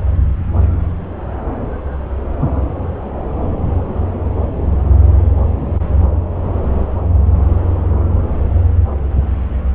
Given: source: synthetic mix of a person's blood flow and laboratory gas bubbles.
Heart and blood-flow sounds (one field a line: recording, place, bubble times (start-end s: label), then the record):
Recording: Doppler ultrasound of blood flow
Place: subclavian vein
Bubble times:
no bubbles
From the record:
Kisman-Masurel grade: 000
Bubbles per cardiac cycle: 0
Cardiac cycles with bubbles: 0%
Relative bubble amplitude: no bubbles discernible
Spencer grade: 0 (complete lack of bubble signals)